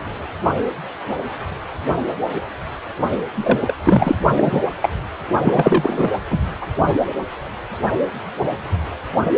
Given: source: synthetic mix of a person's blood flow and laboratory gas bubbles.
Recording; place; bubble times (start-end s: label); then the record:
Doppler ultrasound of blood flow; precordium
3.35-3.73 s: bubbles
3.83-4.16 s: bubbles
4.37-4.60 s: bubbles
4.82-4.88 s: bubbles
5.44-6.09 s: bubbles
6.30-6.39 s: bubbles
6.61-6.67 s: bubbles
From the record:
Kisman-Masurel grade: 223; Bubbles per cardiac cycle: several, 3 to 8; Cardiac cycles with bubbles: 10 to 50%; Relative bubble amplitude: loud (0.450 to 0.775); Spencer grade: 2 (many but less than half of the cardiac periods contain bubble signals, singularly or in groups); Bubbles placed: only in the low amplitude regions of the cardiac cycle